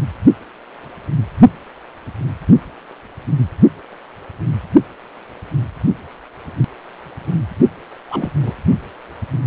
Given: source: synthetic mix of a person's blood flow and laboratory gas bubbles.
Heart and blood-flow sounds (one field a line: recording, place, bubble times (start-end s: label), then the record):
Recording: Doppler ultrasound of blood flow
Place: precordium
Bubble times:
8.09-8.31 s: bubbles
8.42-8.53 s: bubbles
From the record:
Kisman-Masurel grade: 212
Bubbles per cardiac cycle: several, 3 to 8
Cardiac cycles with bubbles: 1 to 10%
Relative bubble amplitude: moderate (0.250 to 0.450)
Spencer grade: 1 (occasional bubble signal discernible with the cardiac motion signal, with majority of cardiac periods free of bubbles)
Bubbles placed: anywhere in the cardiac cycle